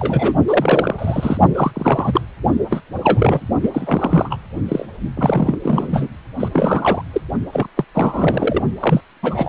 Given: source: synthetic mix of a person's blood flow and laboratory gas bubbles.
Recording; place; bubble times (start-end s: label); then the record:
Doppler ultrasound of blood flow; precordium
0.00-0.34 s: bubbles
0.47-0.95 s: bubbles
0.98-1.38 s: bubbles
1.55-2.21 s: bubbles
2.69-2.80 s: bubbles
3.04-3.46 s: bubbles
3.62-3.71 s: bubbles
3.73-4.37 s: bubbles
4.68-4.85 s: bubbles
5.15-5.58 s: bubbles
5.63-6.08 s: bubbles
6.39-6.48 s: bubbles
6.54-7.02 s: bubbles
7.13-7.21 s: bubbles
7.52-7.66 s: bubbles
7.77-7.85 s: bubbles
7.95-8.62 s: bubbles
8.79-9.00 s: bubbles
9.22-9.49 s: bubbles
From the record:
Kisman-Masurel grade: 343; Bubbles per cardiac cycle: rolling drumbeat, 9 or more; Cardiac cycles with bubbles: 100%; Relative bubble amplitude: loud (0.450 to 0.775); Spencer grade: 3 (all of the cardiac periods contain showers or single bubble signals, but not dominating or overriding the cardiac motion signals); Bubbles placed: only in the low amplitude regions of the cardiac cycle